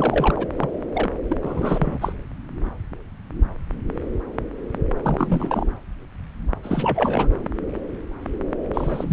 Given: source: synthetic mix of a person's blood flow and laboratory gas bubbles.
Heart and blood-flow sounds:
Doppler ultrasound of blood flow; subclavian vein
0.00-0.46 s: bubbles
0.57-0.70 s: bubbles
0.93-1.10 s: bubbles
1.29-2.13 s: bubbles
5.03-5.68 s: bubbles
6.63-7.29 s: bubbles
8.73-9.13 s: bubbles
From the record:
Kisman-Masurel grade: 332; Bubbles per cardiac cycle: rolling drumbeat, 9 or more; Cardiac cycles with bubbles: 50 to 99%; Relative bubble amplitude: moderate (0.250 to 0.450); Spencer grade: 3 (all of the cardiac periods contain showers or single bubble signals, but not dominating or overriding the cardiac motion signals); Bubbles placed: anywhere in the cardiac cycle

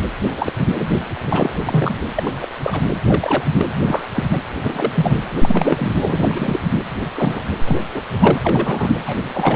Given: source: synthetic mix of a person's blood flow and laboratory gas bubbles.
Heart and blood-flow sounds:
Doppler ultrasound of blood flow; precordium
0.37-0.54 s: bubbles
0.79-0.88 s: bubbles
1.25-1.56 s: bubbles
1.63-1.95 s: bubbles
2.15-2.46 s: bubbles
2.63-2.81 s: bubbles
3.06-3.44 s: bubbles
3.56-3.66 s: bubbles
3.86-4.02 s: bubbles
4.15-4.42 s: bubbles
4.64-4.93 s: bubbles
4.95-5.23 s: bubbles
5.40-6.60 s: bubbles
7.16-7.42 s: bubbles
7.65-7.80 s: bubbles
7.95-8.01 s: bubbles
8.19-8.98 s: bubbles
9.05-9.56 s: bubbles
From the record:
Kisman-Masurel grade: 242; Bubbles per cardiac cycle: several, 3 to 8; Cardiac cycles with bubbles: 100%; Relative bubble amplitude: moderate (0.250 to 0.450); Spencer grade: 3 (all of the cardiac periods contain showers or single bubble signals, but not dominating or overriding the cardiac motion signals); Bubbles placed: anywhere in the cardiac cycle

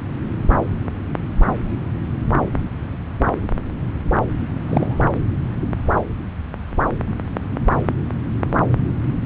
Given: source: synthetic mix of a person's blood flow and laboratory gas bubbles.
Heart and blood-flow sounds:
Doppler ultrasound of blood flow; subclavian vein
4.69-5.19 s: bubbles
From the record:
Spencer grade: 1 (occasional bubble signal discernible with the cardiac motion signal, with majority of cardiac periods free of bubbles); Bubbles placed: anywhere in the cardiac cycle

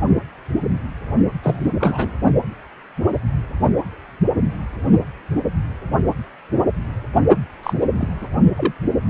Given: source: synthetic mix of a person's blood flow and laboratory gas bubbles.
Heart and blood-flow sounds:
Doppler ultrasound of blood flow; precordium
1.43-1.72 s: bubbles
1.79-2.15 s: bubbles
7.63-7.73 s: bubbles
7.97-8.28 s: bubbles
8.57-8.72 s: bubbles
From the record:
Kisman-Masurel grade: 222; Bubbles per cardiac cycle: several, 3 to 8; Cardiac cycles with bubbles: 10 to 50%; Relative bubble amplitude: moderate (0.250 to 0.450); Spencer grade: 2 (many but less than half of the cardiac periods contain bubble signals, singularly or in groups); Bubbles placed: only in the low amplitude regions of the cardiac cycle

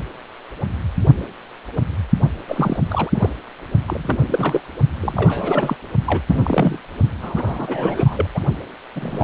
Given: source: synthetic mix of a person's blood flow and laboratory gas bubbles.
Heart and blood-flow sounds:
Doppler ultrasound of blood flow; precordium
2.48-2.79 s: bubbles
2.88-3.29 s: bubbles
3.88-4.61 s: bubbles
5.00-5.77 s: bubbles
6.07-6.21 s: bubbles
6.28-6.79 s: bubbles
7.22-7.44 s: bubbles
7.46-8.29 s: bubbles
8.35-8.40 s: bubbles
8.96-9.24 s: bubbles
From the record:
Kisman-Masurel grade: 232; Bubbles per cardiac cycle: several, 3 to 8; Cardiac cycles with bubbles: 50 to 99%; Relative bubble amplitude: moderate (0.250 to 0.450); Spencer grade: 3 (all of the cardiac periods contain showers or single bubble signals, but not dominating or overriding the cardiac motion signals); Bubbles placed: only in the low amplitude regions of the cardiac cycle

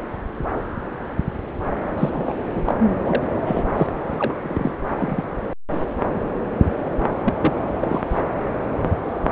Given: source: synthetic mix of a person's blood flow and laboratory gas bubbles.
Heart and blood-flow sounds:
Doppler ultrasound of blood flow; subclavian vein
1.97-2.10 s: bubbles
2.13-2.42 s: bubbles
2.54-2.62 s: bubbles
2.64-2.75 s: bubbles
3.04-3.23 s: bubbles
3.46-3.63 s: bubbles
3.76-3.86 s: bubbles
4.10-4.38 s: bubbles
4.43-4.74 s: bubbles
4.89-5.24 s: bubbles
7.23-7.33 s: bubbles
7.41-7.52 s: bubbles
7.80-8.02 s: bubbles
8.10-8.23 s: bubbles
From the record:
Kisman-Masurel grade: 232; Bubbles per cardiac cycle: several, 3 to 8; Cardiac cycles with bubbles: 50 to 99%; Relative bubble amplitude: moderate (0.250 to 0.450); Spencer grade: 3 (all of the cardiac periods contain showers or single bubble signals, but not dominating or overriding the cardiac motion signals); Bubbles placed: anywhere in the cardiac cycle

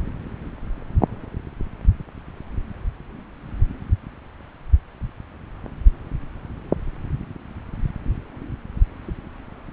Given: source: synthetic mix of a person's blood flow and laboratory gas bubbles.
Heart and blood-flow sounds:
Doppler ultrasound of blood flow; subclavian vein
no bubbles
From the record:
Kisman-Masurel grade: 000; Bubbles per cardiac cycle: 0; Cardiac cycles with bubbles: 0%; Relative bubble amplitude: no bubbles discernible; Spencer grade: 0 (complete lack of bubble signals)

